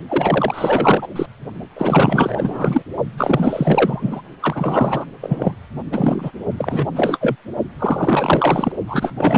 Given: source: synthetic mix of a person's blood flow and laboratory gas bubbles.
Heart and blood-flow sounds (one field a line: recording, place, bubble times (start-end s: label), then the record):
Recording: Doppler ultrasound of blood flow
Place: precordium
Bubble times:
0.08-1.07 s: bubbles
1.16-1.26 s: bubbles
1.75-2.83 s: bubbles
3.17-4.22 s: bubbles
4.39-5.06 s: bubbles
5.21-5.56 s: bubbles
5.92-6.32 s: bubbles
6.57-6.86 s: bubbles
6.95-7.36 s: bubbles
7.79-8.72 s: bubbles
8.87-9.13 s: bubbles
9.17-9.38 s: bubbles
From the record:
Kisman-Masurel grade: 444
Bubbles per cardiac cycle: continuous sound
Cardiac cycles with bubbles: 100%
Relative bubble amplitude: maximal (0.775 to 0.999)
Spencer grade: 4 (maximum detectable bubble signal sounding continuously throughout systole and diastole of every cardiac period, and overriding the amplitude of the normal cardiac signals)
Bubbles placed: only in the low amplitude regions of the cardiac cycle